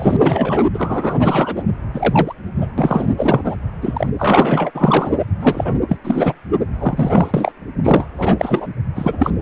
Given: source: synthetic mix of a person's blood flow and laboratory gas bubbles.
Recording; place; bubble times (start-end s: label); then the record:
Doppler ultrasound of blood flow; precordium
0.00-0.64 s: bubbles
0.73-1.63 s: bubbles
1.94-2.33 s: bubbles
2.60-2.67 s: bubbles
2.77-3.08 s: bubbles
3.17-3.55 s: bubbles
3.81-4.07 s: bubbles
4.19-4.71 s: bubbles
4.75-5.17 s: bubbles
5.40-5.73 s: bubbles
5.88-5.97 s: bubbles
6.04-6.33 s: bubbles
6.70-7.52 s: bubbles
7.83-8.05 s: bubbles
8.17-8.36 s: bubbles
8.39-8.72 s: bubbles
8.95-9.16 s: bubbles
9.19-9.30 s: bubbles
From the record:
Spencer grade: 3 (all of the cardiac periods contain showers or single bubble signals, but not dominating or overriding the cardiac motion signals); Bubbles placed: anywhere in the cardiac cycle